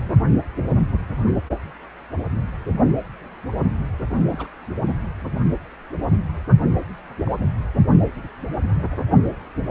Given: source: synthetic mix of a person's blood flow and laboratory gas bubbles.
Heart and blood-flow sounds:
Doppler ultrasound of blood flow; precordium
4.29-4.48 s: bubbles
7.26-7.46 s: bubbles
9.56-9.62 s: bubbles
From the record:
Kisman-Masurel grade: 121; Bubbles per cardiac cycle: 1 to 2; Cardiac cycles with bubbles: 10 to 50%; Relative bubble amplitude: barely perceptible (0.100 to 0.250); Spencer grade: 2 (many but less than half of the cardiac periods contain bubble signals, singularly or in groups); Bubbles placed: anywhere in the cardiac cycle

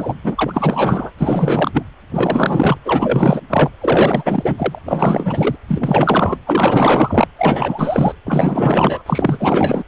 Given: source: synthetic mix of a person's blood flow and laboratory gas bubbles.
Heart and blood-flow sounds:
Doppler ultrasound of blood flow; precordium
0.00-0.14 s: bubbles
0.24-1.11 s: bubbles
1.18-1.71 s: bubbles
1.73-1.83 s: bubbles
2.11-2.78 s: bubbles
2.85-3.41 s: bubbles
3.50-3.71 s: bubbles
3.81-4.54 s: bubbles
4.57-4.79 s: bubbles
4.86-5.56 s: bubbles
5.67-6.38 s: bubbles
6.46-7.27 s: bubbles
7.38-8.15 s: bubbles
8.26-9.02 s: bubbles
9.06-9.83 s: bubbles
From the record:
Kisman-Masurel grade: 444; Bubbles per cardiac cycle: continuous sound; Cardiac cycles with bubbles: 100%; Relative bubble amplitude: maximal (0.775 to 0.999); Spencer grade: 4 (maximum detectable bubble signal sounding continuously throughout systole and diastole of every cardiac period, and overriding the amplitude of the normal cardiac signals); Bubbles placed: anywhere in the cardiac cycle

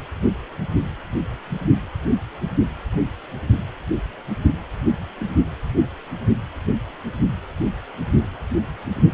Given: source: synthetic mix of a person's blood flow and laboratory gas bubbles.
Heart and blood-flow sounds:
Doppler ultrasound of blood flow; precordium
no bubbles
From the record:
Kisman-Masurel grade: 000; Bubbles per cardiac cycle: 0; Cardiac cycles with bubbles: 0%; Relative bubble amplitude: no bubbles discernible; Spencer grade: 0 (complete lack of bubble signals)

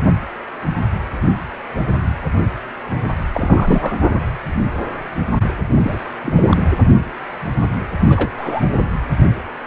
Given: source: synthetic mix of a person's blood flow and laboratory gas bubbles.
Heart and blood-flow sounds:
Doppler ultrasound of blood flow; precordium
3.32-3.96 s: bubbles
5.71-5.99 s: bubbles
6.22-6.65 s: bubbles
8.01-8.29 s: bubbles
8.37-8.62 s: bubbles
From the record:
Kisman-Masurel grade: 222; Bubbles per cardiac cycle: several, 3 to 8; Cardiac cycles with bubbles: 10 to 50%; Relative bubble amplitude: moderate (0.250 to 0.450); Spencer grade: 2 (many but less than half of the cardiac periods contain bubble signals, singularly or in groups); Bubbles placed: anywhere in the cardiac cycle

